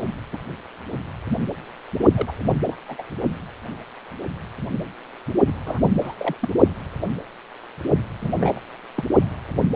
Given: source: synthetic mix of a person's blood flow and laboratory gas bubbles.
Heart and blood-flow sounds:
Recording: Doppler ultrasound of blood flow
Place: precordium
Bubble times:
0.33-0.37 s: bubbles
2.15-2.33 s: bubbles
2.66-2.77 s: bubbles
2.89-3.03 s: bubbles
5.46-5.53 s: bubbles
5.66-5.91 s: bubbles
6.00-6.15 s: bubbles
6.18-6.36 s: bubbles
6.41-6.49 s: bubbles
8.21-8.31 s: bubbles
8.39-8.60 s: bubbles
8.95-9.04 s: bubbles
From the record:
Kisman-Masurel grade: 222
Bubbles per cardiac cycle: several, 3 to 8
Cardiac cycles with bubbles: 10 to 50%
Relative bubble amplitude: moderate (0.250 to 0.450)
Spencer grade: 2 (many but less than half of the cardiac periods contain bubble signals, singularly or in groups)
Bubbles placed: only in the low amplitude regions of the cardiac cycle

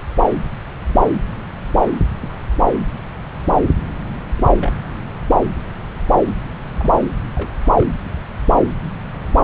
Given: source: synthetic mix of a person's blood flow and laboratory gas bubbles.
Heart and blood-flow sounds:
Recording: Doppler ultrasound of blood flow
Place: subclavian vein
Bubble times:
2.20-2.47 s: bubbles
4.37-4.43 s: bubbles
4.60-4.73 s: bubbles
6.79-6.92 s: bubbles
7.35-7.58 s: bubbles
7.62-7.87 s: bubbles
From the record:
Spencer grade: 2 (many but less than half of the cardiac periods contain bubble signals, singularly or in groups)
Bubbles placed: anywhere in the cardiac cycle

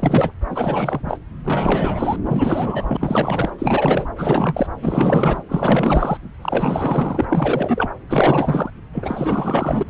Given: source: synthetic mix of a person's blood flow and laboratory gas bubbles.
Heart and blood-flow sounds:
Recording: Doppler ultrasound of blood flow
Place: subclavian vein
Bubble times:
0.00-0.32 s: bubbles
0.50-1.19 s: bubbles
1.44-2.17 s: bubbles
2.26-2.97 s: bubbles
3.00-3.51 s: bubbles
3.58-4.07 s: bubbles
4.18-4.67 s: bubbles
4.82-5.42 s: bubbles
5.49-6.17 s: bubbles
6.42-7.25 s: bubbles
7.29-7.89 s: bubbles
8.09-8.70 s: bubbles
8.92-9.83 s: bubbles
9.86-9.90 s: bubbles
From the record:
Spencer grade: 4 (maximum detectable bubble signal sounding continuously throughout systole and diastole of every cardiac period, and overriding the amplitude of the normal cardiac signals)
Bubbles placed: anywhere in the cardiac cycle

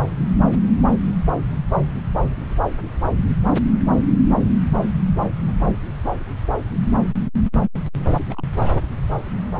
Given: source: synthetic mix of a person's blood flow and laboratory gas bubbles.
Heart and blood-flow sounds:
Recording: Doppler ultrasound of blood flow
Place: subclavian vein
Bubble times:
8.00-8.05 s: bubbles
8.08-8.25 s: bubbles
8.29-8.44 s: bubbles
8.62-8.77 s: bubbles
From the record:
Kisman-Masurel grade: 211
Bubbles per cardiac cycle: several, 3 to 8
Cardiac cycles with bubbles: 1 to 10%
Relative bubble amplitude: barely perceptible (0.100 to 0.250)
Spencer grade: 1 (occasional bubble signal discernible with the cardiac motion signal, with majority of cardiac periods free of bubbles)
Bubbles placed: anywhere in the cardiac cycle

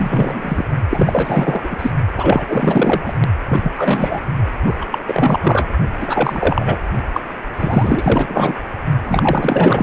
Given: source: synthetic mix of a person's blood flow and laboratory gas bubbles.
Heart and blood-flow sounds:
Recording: Doppler ultrasound of blood flow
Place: precordium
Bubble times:
0.00-0.65 s: bubbles
0.90-1.92 s: bubbles
2.15-2.45 s: bubbles
2.48-3.14 s: bubbles
3.47-3.72 s: bubbles
3.75-4.21 s: bubbles
4.65-4.75 s: bubbles
4.81-4.86 s: bubbles
4.91-4.98 s: bubbles
5.05-5.39 s: bubbles
5.42-5.69 s: bubbles
6.00-6.77 s: bubbles
7.13-7.21 s: bubbles
7.54-8.55 s: bubbles
9.05-9.83 s: bubbles
From the record:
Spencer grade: 4 (maximum detectable bubble signal sounding continuously throughout systole and diastole of every cardiac period, and overriding the amplitude of the normal cardiac signals)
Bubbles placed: only in the low amplitude regions of the cardiac cycle

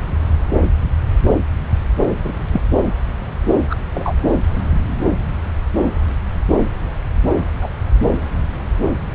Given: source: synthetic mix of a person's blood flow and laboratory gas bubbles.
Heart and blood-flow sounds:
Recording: Doppler ultrasound of blood flow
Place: subclavian vein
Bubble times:
2.24-2.32 s: bubbles
2.52-2.62 s: bubbles
3.70-3.75 s: bubbles
3.95-4.13 s: bubbles
7.62-7.68 s: bubbles
From the record:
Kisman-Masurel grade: 123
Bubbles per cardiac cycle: 1 to 2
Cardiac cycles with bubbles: 10 to 50%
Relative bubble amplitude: loud (0.450 to 0.775)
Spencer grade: 2 (many but less than half of the cardiac periods contain bubble signals, singularly or in groups)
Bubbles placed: anywhere in the cardiac cycle

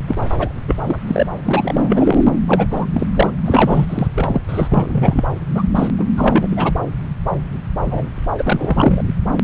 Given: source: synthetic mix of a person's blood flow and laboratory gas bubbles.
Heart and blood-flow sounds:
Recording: Doppler ultrasound of blood flow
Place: subclavian vein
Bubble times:
0.08-0.16 s: bubbles
0.39-0.53 s: bubbles
0.67-0.75 s: bubbles
0.84-0.98 s: bubbles
1.07-1.27 s: bubbles
1.37-1.39 s: bubbles
1.44-2.22 s: bubbles
2.47-2.67 s: bubbles
2.71-2.85 s: bubbles
2.94-3.06 s: bubbles
3.15-3.31 s: bubbles
3.45-3.86 s: bubbles
3.88-4.07 s: bubbles
4.15-4.40 s: bubbles
4.49-4.67 s: bubbles
4.71-5.24 s: bubbles
5.54-5.62 s: bubbles
5.75-5.88 s: bubbles
5.99-6.07 s: bubbles
6.17-6.75 s: bubbles
7.91-8.08 s: bubbles
8.38-9.02 s: bubbles
From the record:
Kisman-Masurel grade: 333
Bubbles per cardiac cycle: rolling drumbeat, 9 or more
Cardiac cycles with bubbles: 50 to 99%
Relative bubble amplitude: loud (0.450 to 0.775)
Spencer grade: 3 (all of the cardiac periods contain showers or single bubble signals, but not dominating or overriding the cardiac motion signals)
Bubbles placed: anywhere in the cardiac cycle

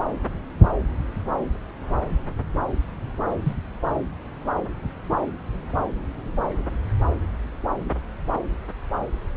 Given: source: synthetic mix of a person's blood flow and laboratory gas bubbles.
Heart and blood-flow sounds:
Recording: Doppler ultrasound of blood flow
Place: subclavian vein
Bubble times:
3.45-3.54 s: bubbles
From the record:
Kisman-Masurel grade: 112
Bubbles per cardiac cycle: 1 to 2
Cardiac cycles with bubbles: 1 to 10%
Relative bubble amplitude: moderate (0.250 to 0.450)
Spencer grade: 1 (occasional bubble signal discernible with the cardiac motion signal, with majority of cardiac periods free of bubbles)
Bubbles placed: anywhere in the cardiac cycle

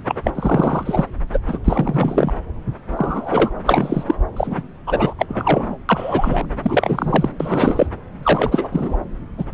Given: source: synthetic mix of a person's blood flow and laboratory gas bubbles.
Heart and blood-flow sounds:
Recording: Doppler ultrasound of blood flow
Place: subclavian vein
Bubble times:
0.08-0.21 s: bubbles
0.24-0.32 s: bubbles
0.34-1.05 s: bubbles
1.32-1.38 s: bubbles
1.48-1.59 s: bubbles
1.64-2.32 s: bubbles
2.97-3.52 s: bubbles
3.65-4.04 s: bubbles
4.07-4.15 s: bubbles
4.36-4.55 s: bubbles
4.58-4.64 s: bubbles
4.87-5.14 s: bubbles
5.18-5.26 s: bubbles
5.29-5.78 s: bubbles
5.89-6.46 s: bubbles
6.63-7.31 s: bubbles
7.40-7.87 s: bubbles
8.22-8.69 s: bubbles
8.71-8.97 s: bubbles
9.37-9.44 s: bubbles
From the record:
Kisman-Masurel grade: 233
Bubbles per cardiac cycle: several, 3 to 8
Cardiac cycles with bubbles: 50 to 99%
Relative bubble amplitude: loud (0.450 to 0.775)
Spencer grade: 3 (all of the cardiac periods contain showers or single bubble signals, but not dominating or overriding the cardiac motion signals)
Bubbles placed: anywhere in the cardiac cycle

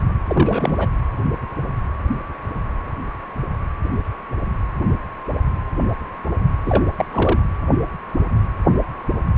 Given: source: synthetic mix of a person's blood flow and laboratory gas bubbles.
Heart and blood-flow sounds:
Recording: Doppler ultrasound of blood flow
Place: precordium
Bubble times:
0.27-0.90 s: bubbles
6.66-6.86 s: bubbles
6.96-7.05 s: bubbles
7.12-7.42 s: bubbles
From the record:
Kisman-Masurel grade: 222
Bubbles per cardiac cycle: several, 3 to 8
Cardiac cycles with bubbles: 10 to 50%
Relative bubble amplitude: moderate (0.250 to 0.450)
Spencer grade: 2 (many but less than half of the cardiac periods contain bubble signals, singularly or in groups)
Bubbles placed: anywhere in the cardiac cycle

